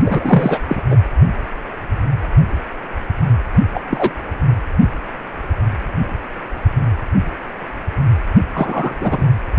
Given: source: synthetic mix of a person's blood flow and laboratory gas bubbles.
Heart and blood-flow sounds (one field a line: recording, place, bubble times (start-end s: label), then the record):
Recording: Doppler ultrasound of blood flow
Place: precordium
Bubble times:
0.04-0.60 s: bubbles
0.67-0.82 s: bubbles
0.90-0.98 s: bubbles
3.74-3.81 s: bubbles
3.90-4.10 s: bubbles
8.53-8.96 s: bubbles
9.01-9.25 s: bubbles
From the record:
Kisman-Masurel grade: 223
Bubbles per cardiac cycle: several, 3 to 8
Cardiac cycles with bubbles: 10 to 50%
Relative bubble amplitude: loud (0.450 to 0.775)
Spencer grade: 2 (many but less than half of the cardiac periods contain bubble signals, singularly or in groups)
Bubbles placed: anywhere in the cardiac cycle